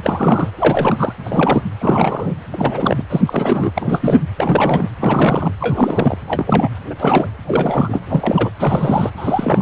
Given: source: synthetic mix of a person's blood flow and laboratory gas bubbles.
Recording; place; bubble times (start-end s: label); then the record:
Doppler ultrasound of blood flow; precordium
0.03-0.51 s: bubbles
0.58-1.13 s: bubbles
1.24-1.61 s: bubbles
1.80-2.33 s: bubbles
2.52-3.05 s: bubbles
3.10-3.21 s: bubbles
3.26-4.23 s: bubbles
4.38-4.89 s: bubbles
5.00-5.52 s: bubbles
5.61-6.17 s: bubbles
6.27-6.68 s: bubbles
6.90-6.95 s: bubbles
6.99-7.27 s: bubbles
7.46-8.00 s: bubbles
8.08-8.50 s: bubbles
8.59-9.10 s: bubbles
9.16-9.62 s: bubbles
From the record:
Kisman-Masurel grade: 342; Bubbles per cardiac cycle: rolling drumbeat, 9 or more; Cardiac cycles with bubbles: 100%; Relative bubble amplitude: moderate (0.250 to 0.450); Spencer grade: 3 (all of the cardiac periods contain showers or single bubble signals, but not dominating or overriding the cardiac motion signals); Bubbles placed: anywhere in the cardiac cycle